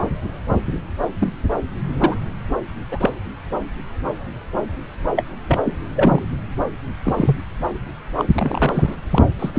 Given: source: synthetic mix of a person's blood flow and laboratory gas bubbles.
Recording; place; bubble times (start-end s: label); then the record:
Doppler ultrasound of blood flow; subclavian vein
1.19-1.32 s: bubbles
1.99-2.16 s: bubbles
2.92-3.10 s: bubbles
5.16-5.24 s: bubbles
5.48-5.58 s: bubbles
5.65-5.77 s: bubbles
5.96-6.29 s: bubbles
7.04-7.37 s: bubbles
8.17-8.25 s: bubbles
8.38-8.96 s: bubbles
9.11-9.25 s: bubbles
9.39-9.51 s: bubbles
9.54-9.59 s: bubbles
From the record:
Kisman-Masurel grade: 232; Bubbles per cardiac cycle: several, 3 to 8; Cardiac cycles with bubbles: 50 to 99%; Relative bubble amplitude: moderate (0.250 to 0.450); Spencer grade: 3 (all of the cardiac periods contain showers or single bubble signals, but not dominating or overriding the cardiac motion signals); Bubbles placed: anywhere in the cardiac cycle